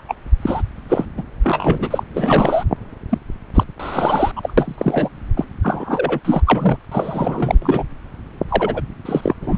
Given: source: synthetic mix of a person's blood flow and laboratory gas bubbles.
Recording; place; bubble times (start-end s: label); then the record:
Doppler ultrasound of blood flow; subclavian vein
0.08-0.14 s: bubbles
0.42-0.61 s: bubbles
0.89-1.05 s: bubbles
1.17-1.23 s: bubbles
1.43-2.03 s: bubbles
2.15-2.64 s: bubbles
3.09-3.18 s: bubbles
3.54-3.63 s: bubbles
3.79-4.32 s: bubbles
4.36-4.54 s: bubbles
4.58-5.08 s: bubbles
5.37-5.45 s: bubbles
5.62-6.20 s: bubbles
6.25-6.42 s: bubbles
6.46-6.78 s: bubbles
6.92-7.58 s: bubbles
7.62-7.83 s: bubbles
8.48-8.81 s: bubbles
9.05-9.34 s: bubbles
9.40-9.58 s: bubbles
From the record:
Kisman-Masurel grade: 343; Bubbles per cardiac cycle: rolling drumbeat, 9 or more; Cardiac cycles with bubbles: 100%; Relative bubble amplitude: loud (0.450 to 0.775); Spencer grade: 3 (all of the cardiac periods contain showers or single bubble signals, but not dominating or overriding the cardiac motion signals); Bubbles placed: anywhere in the cardiac cycle